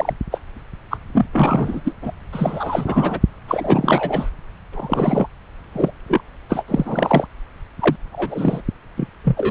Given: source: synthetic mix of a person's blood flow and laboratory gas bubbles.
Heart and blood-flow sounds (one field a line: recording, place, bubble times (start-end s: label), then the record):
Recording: Doppler ultrasound of blood flow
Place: subclavian vein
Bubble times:
0.00-0.12 s: bubbles
0.31-0.39 s: bubbles
0.91-0.97 s: bubbles
1.12-1.25 s: bubbles
1.32-1.81 s: bubbles
1.84-1.93 s: bubbles
2.02-2.11 s: bubbles
2.33-3.21 s: bubbles
3.48-4.29 s: bubbles
4.72-5.27 s: bubbles
5.73-5.91 s: bubbles
6.08-6.21 s: bubbles
6.49-6.63 s: bubbles
6.68-7.27 s: bubbles
7.79-7.96 s: bubbles
8.12-8.62 s: bubbles
8.96-9.09 s: bubbles
9.24-9.51 s: bubbles
From the record:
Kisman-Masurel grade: 243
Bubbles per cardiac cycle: several, 3 to 8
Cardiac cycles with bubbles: 100%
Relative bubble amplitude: loud (0.450 to 0.775)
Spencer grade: 3 (all of the cardiac periods contain showers or single bubble signals, but not dominating or overriding the cardiac motion signals)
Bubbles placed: anywhere in the cardiac cycle